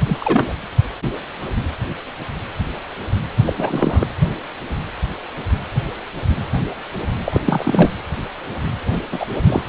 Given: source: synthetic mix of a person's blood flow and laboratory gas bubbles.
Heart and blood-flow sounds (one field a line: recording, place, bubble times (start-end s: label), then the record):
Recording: Doppler ultrasound of blood flow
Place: precordium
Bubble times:
0.06-0.18 s: bubbles
0.20-0.55 s: bubbles
3.46-3.54 s: bubbles
3.57-4.06 s: bubbles
7.24-7.40 s: bubbles
7.46-7.90 s: bubbles
9.12-9.26 s: bubbles
9.46-9.62 s: bubbles
From the record:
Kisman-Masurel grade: 223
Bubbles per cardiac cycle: several, 3 to 8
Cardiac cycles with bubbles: 10 to 50%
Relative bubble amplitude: loud (0.450 to 0.775)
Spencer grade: 2 (many but less than half of the cardiac periods contain bubble signals, singularly or in groups)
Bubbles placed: anywhere in the cardiac cycle